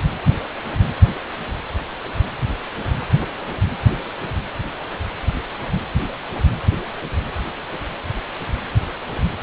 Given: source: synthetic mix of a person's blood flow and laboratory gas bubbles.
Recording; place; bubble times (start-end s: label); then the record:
Doppler ultrasound of blood flow; precordium
no bubbles
From the record:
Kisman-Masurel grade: 000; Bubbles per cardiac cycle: 0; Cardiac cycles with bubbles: 0%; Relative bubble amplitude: no bubbles discernible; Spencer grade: 0 (complete lack of bubble signals)